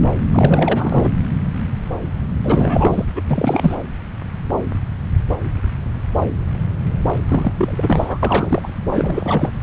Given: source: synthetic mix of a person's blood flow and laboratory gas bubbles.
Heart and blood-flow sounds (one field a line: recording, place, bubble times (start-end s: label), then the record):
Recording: Doppler ultrasound of blood flow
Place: subclavian vein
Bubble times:
0.32-1.10 s: bubbles
2.44-3.05 s: bubbles
3.15-3.22 s: bubbles
3.27-3.75 s: bubbles
7.28-7.53 s: bubbles
7.58-8.18 s: bubbles
8.22-8.68 s: bubbles
8.79-9.55 s: bubbles
From the record:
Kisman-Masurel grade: 333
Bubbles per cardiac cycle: rolling drumbeat, 9 or more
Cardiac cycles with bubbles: 50 to 99%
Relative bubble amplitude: loud (0.450 to 0.775)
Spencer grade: 3 (all of the cardiac periods contain showers or single bubble signals, but not dominating or overriding the cardiac motion signals)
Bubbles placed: anywhere in the cardiac cycle